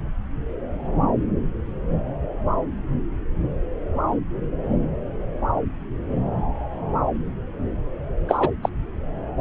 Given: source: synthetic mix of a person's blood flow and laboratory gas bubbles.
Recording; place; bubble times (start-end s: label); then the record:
Doppler ultrasound of blood flow; subclavian vein
8.29-8.49 s: bubbles
8.62-8.69 s: bubbles
From the record:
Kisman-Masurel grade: 213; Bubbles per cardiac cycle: several, 3 to 8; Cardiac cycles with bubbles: 1 to 10%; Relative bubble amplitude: loud (0.450 to 0.775); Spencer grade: 1 (occasional bubble signal discernible with the cardiac motion signal, with majority of cardiac periods free of bubbles); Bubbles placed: anywhere in the cardiac cycle